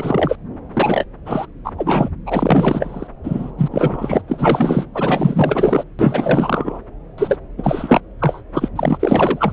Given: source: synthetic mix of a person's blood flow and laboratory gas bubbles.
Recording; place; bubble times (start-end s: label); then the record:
Doppler ultrasound of blood flow; subclavian vein
0.00-0.36 s: bubbles
0.73-1.04 s: bubbles
1.25-1.46 s: bubbles
1.65-1.72 s: bubbles
1.77-2.09 s: bubbles
2.26-3.08 s: bubbles
3.23-3.52 s: bubbles
3.58-3.68 s: bubbles
3.71-4.21 s: bubbles
4.27-4.85 s: bubbles
4.93-5.83 s: bubbles
5.99-6.80 s: bubbles
7.18-7.38 s: bubbles
7.58-8.01 s: bubbles
8.19-8.41 s: bubbles
8.53-8.69 s: bubbles
8.76-9.53 s: bubbles
From the record:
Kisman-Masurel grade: 444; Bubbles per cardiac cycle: continuous sound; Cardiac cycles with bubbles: 100%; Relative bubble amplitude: maximal (0.775 to 0.999); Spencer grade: 4 (maximum detectable bubble signal sounding continuously throughout systole and diastole of every cardiac period, and overriding the amplitude of the normal cardiac signals); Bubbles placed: anywhere in the cardiac cycle